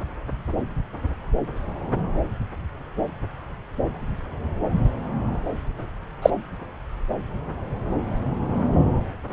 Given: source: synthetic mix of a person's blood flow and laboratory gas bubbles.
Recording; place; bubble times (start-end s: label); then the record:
Doppler ultrasound of blood flow; subclavian vein
6.22-6.30 s: bubbles
From the record:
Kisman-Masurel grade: 113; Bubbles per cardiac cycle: 1 to 2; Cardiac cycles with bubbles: 1 to 10%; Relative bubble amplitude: loud (0.450 to 0.775); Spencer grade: 1 (occasional bubble signal discernible with the cardiac motion signal, with majority of cardiac periods free of bubbles); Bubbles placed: anywhere in the cardiac cycle